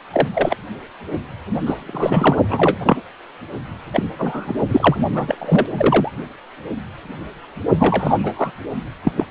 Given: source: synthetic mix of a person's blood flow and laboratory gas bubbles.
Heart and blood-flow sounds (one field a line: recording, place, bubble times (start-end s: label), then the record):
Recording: Doppler ultrasound of blood flow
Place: precordium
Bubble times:
0.12-0.28 s: bubbles
0.33-0.56 s: bubbles
1.65-1.83 s: bubbles
1.87-2.37 s: bubbles
2.48-2.79 s: bubbles
2.83-3.02 s: bubbles
3.93-4.03 s: bubbles
4.18-4.53 s: bubbles
4.69-4.96 s: bubbles
5.15-5.66 s: bubbles
5.77-6.12 s: bubbles
7.78-8.51 s: bubbles
9.04-9.12 s: bubbles
9.16-9.25 s: bubbles
From the record:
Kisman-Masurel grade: 233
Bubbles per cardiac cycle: several, 3 to 8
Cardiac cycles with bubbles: 50 to 99%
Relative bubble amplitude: loud (0.450 to 0.775)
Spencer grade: 3 (all of the cardiac periods contain showers or single bubble signals, but not dominating or overriding the cardiac motion signals)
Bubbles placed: only in the low amplitude regions of the cardiac cycle